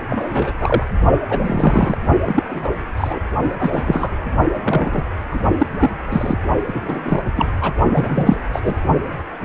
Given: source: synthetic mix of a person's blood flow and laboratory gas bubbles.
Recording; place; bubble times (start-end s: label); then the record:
Doppler ultrasound of blood flow; precordium
0.09-0.53 s: bubbles
0.59-0.83 s: bubbles
1.29-1.98 s: bubbles
2.26-2.43 s: bubbles
2.50-2.71 s: bubbles
2.97-3.19 s: bubbles
3.58-4.12 s: bubbles
4.53-5.04 s: bubbles
5.30-5.41 s: bubbles
5.58-5.67 s: bubbles
5.79-5.91 s: bubbles
6.12-6.38 s: bubbles
6.67-7.21 s: bubbles
7.35-7.46 s: bubbles
7.61-7.72 s: bubbles
7.93-8.38 s: bubbles
8.53-8.76 s: bubbles
From the record:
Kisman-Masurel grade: 243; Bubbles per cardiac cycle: several, 3 to 8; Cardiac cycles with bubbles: 100%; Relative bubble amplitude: loud (0.450 to 0.775); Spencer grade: 3 (all of the cardiac periods contain showers or single bubble signals, but not dominating or overriding the cardiac motion signals); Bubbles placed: only in the low amplitude regions of the cardiac cycle